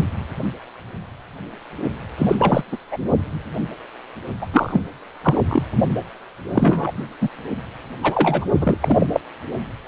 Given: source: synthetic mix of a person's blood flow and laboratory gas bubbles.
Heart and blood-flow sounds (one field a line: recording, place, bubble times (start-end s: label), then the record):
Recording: Doppler ultrasound of blood flow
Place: precordium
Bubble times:
2.18-2.77 s: bubbles
2.90-2.98 s: bubbles
4.41-4.46 s: bubbles
4.53-4.82 s: bubbles
5.22-5.69 s: bubbles
6.52-6.92 s: bubbles
7.21-7.29 s: bubbles
8.03-8.46 s: bubbles
8.61-8.78 s: bubbles
8.80-9.07 s: bubbles
9.13-9.21 s: bubbles
From the record:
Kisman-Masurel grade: 233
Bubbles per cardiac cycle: several, 3 to 8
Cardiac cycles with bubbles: 50 to 99%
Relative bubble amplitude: loud (0.450 to 0.775)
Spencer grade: 3 (all of the cardiac periods contain showers or single bubble signals, but not dominating or overriding the cardiac motion signals)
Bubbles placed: only in the low amplitude regions of the cardiac cycle